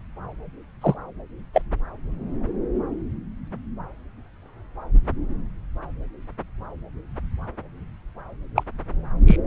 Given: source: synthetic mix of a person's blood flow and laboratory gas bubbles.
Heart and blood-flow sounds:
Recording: Doppler ultrasound of blood flow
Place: subclavian vein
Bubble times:
0.82-0.95 s: bubbles
1.54-1.61 s: bubbles
8.55-8.63 s: bubbles
9.27-9.37 s: bubbles
From the record:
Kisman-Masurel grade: 123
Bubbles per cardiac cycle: 1 to 2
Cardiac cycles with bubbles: 10 to 50%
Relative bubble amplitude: loud (0.450 to 0.775)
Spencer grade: 2 (many but less than half of the cardiac periods contain bubble signals, singularly or in groups)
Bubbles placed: anywhere in the cardiac cycle

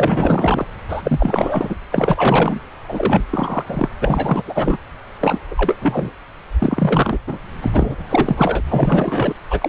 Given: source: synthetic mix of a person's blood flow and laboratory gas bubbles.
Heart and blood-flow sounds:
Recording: Doppler ultrasound of blood flow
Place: subclavian vein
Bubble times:
0.00-0.68 s: bubbles
0.89-1.75 s: bubbles
1.91-2.60 s: bubbles
2.88-3.23 s: bubbles
3.30-3.90 s: bubbles
4.01-4.42 s: bubbles
4.47-4.79 s: bubbles
5.21-5.38 s: bubbles
5.50-5.78 s: bubbles
5.80-6.12 s: bubbles
6.58-7.20 s: bubbles
7.26-7.40 s: bubbles
7.61-8.05 s: bubbles
8.09-8.62 s: bubbles
8.65-9.34 s: bubbles
9.50-9.69 s: bubbles
From the record:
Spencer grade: 4 (maximum detectable bubble signal sounding continuously throughout systole and diastole of every cardiac period, and overriding the amplitude of the normal cardiac signals)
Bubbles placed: anywhere in the cardiac cycle

